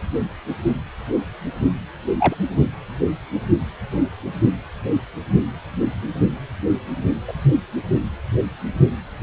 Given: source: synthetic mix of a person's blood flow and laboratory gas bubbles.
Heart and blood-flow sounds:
Doppler ultrasound of blood flow; precordium
2.18-2.35 s: bubbles
7.28-7.33 s: bubbles
From the record:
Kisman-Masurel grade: 122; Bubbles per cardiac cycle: 1 to 2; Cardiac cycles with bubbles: 10 to 50%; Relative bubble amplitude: moderate (0.250 to 0.450); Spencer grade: 2 (many but less than half of the cardiac periods contain bubble signals, singularly or in groups); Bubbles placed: anywhere in the cardiac cycle

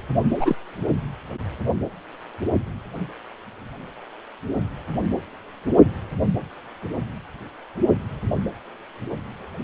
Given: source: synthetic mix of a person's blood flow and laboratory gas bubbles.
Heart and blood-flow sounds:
Doppler ultrasound of blood flow; precordium
0.29-0.55 s: bubbles
From the record:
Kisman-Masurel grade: 112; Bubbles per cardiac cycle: 1 to 2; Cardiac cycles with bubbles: 1 to 10%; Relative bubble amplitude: moderate (0.250 to 0.450); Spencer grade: 1 (occasional bubble signal discernible with the cardiac motion signal, with majority of cardiac periods free of bubbles); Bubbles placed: anywhere in the cardiac cycle

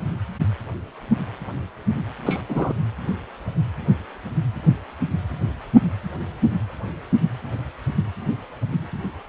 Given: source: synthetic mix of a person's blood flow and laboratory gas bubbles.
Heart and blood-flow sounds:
Doppler ultrasound of blood flow; precordium
2.26-2.42 s: bubbles
2.49-2.73 s: bubbles
From the record:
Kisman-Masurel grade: 112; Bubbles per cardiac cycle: 1 to 2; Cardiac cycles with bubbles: 1 to 10%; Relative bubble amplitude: moderate (0.250 to 0.450); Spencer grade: 1 (occasional bubble signal discernible with the cardiac motion signal, with majority of cardiac periods free of bubbles); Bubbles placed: anywhere in the cardiac cycle

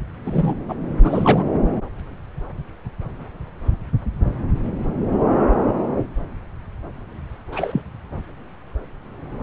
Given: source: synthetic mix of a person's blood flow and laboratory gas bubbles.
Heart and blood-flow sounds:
Doppler ultrasound of blood flow; subclavian vein
0.26-0.57 s: bubbles
0.68-0.74 s: bubbles
1.03-1.44 s: bubbles
7.52-7.81 s: bubbles
From the record:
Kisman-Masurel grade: 222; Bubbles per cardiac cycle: several, 3 to 8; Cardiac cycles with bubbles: 10 to 50%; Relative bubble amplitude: moderate (0.250 to 0.450); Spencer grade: 2 (many but less than half of the cardiac periods contain bubble signals, singularly or in groups); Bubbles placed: anywhere in the cardiac cycle

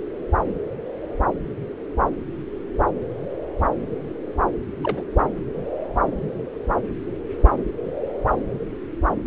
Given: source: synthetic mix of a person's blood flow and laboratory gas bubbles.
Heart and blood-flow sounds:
Doppler ultrasound of blood flow; subclavian vein
4.83-5.02 s: bubbles
5.19-5.25 s: bubbles
From the record:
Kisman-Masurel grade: 211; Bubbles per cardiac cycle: several, 3 to 8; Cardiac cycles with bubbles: 1 to 10%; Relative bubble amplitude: barely perceptible (0.100 to 0.250); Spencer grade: 1 (occasional bubble signal discernible with the cardiac motion signal, with majority of cardiac periods free of bubbles); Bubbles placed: anywhere in the cardiac cycle

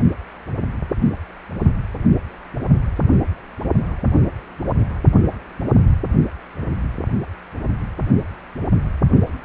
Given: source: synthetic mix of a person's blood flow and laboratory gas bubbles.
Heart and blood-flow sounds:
Doppler ultrasound of blood flow; precordium
no bubbles
From the record:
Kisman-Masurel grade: 000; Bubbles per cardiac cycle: 0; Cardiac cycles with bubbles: 0%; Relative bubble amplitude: no bubbles discernible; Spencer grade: 0 (complete lack of bubble signals)

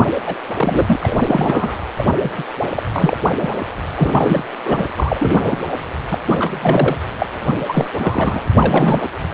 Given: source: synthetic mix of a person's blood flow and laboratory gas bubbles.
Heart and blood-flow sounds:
Doppler ultrasound of blood flow; precordium
0.00-0.08 s: bubbles
0.26-0.35 s: bubbles
0.56-1.78 s: bubbles
1.96-2.05 s: bubbles
2.22-2.32 s: bubbles
2.38-2.44 s: bubbles
2.75-2.83 s: bubbles
2.94-3.17 s: bubbles
3.40-3.50 s: bubbles
3.96-4.44 s: bubbles
4.65-4.84 s: bubbles
4.96-5.60 s: bubbles
6.10-6.19 s: bubbles
6.27-6.96 s: bubbles
7.18-7.26 s: bubbles
7.46-7.53 s: bubbles
7.67-7.88 s: bubbles
7.93-8.42 s: bubbles
8.55-9.04 s: bubbles
From the record:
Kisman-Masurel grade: 342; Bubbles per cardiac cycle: rolling drumbeat, 9 or more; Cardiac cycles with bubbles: 100%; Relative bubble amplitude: moderate (0.250 to 0.450); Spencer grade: 3 (all of the cardiac periods contain showers or single bubble signals, but not dominating or overriding the cardiac motion signals); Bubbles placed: anywhere in the cardiac cycle

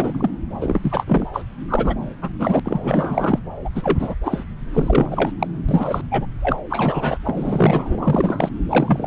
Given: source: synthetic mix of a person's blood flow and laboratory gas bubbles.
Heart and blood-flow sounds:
Doppler ultrasound of blood flow; subclavian vein
0.00-0.31 s: bubbles
0.61-1.28 s: bubbles
1.33-1.42 s: bubbles
1.68-1.95 s: bubbles
2.21-2.29 s: bubbles
2.39-2.60 s: bubbles
2.64-3.40 s: bubbles
3.64-3.70 s: bubbles
3.72-4.15 s: bubbles
4.23-4.45 s: bubbles
4.74-5.32 s: bubbles
5.39-5.48 s: bubbles
5.69-6.02 s: bubbles
6.11-6.25 s: bubbles
6.42-6.57 s: bubbles
6.70-7.17 s: bubbles
7.25-8.49 s: bubbles
8.69-9.07 s: bubbles
From the record:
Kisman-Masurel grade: 343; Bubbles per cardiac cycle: rolling drumbeat, 9 or more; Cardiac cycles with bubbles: 100%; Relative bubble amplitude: loud (0.450 to 0.775); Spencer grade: 3 (all of the cardiac periods contain showers or single bubble signals, but not dominating or overriding the cardiac motion signals); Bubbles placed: anywhere in the cardiac cycle

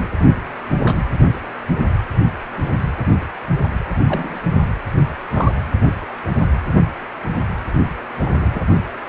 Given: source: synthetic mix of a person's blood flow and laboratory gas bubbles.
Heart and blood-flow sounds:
Doppler ultrasound of blood flow; precordium
0.84-1.01 s: bubbles
4.06-4.41 s: bubbles
5.33-5.52 s: bubbles
8.20-8.61 s: bubbles
From the record:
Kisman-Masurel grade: 122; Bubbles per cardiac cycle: 1 to 2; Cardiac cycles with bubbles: 10 to 50%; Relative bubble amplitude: moderate (0.250 to 0.450); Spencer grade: 2 (many but less than half of the cardiac periods contain bubble signals, singularly or in groups); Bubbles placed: only in the low amplitude regions of the cardiac cycle

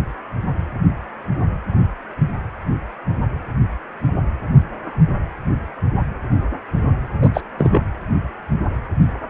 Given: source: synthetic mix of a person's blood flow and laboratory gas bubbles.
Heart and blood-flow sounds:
Doppler ultrasound of blood flow; precordium
7.22-7.29 s: bubbles
7.33-7.42 s: bubbles
7.57-7.81 s: bubbles
From the record:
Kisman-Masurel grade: 213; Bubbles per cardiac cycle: several, 3 to 8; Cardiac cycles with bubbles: 1 to 10%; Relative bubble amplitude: loud (0.450 to 0.775); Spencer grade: 1 (occasional bubble signal discernible with the cardiac motion signal, with majority of cardiac periods free of bubbles); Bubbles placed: anywhere in the cardiac cycle

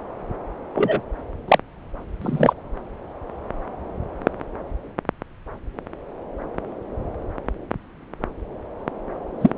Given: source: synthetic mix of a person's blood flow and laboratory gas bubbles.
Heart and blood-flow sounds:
Doppler ultrasound of blood flow; subclavian vein
0.74-1.00 s: bubbles
1.48-1.58 s: bubbles
2.21-2.53 s: bubbles
9.41-9.51 s: bubbles
From the record:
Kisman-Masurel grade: 123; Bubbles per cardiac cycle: 1 to 2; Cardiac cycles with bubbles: 10 to 50%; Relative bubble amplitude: loud (0.450 to 0.775); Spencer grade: 2 (many but less than half of the cardiac periods contain bubble signals, singularly or in groups); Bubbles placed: anywhere in the cardiac cycle

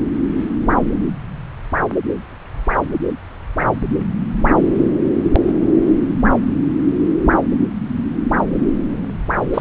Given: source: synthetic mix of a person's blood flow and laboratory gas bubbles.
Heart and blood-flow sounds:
Doppler ultrasound of blood flow; subclavian vein
9.53-9.61 s: bubbles
From the record:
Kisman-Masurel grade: 223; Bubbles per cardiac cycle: several, 3 to 8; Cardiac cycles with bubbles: 10 to 50%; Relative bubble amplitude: loud (0.450 to 0.775); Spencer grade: 2 (many but less than half of the cardiac periods contain bubble signals, singularly or in groups); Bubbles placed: anywhere in the cardiac cycle

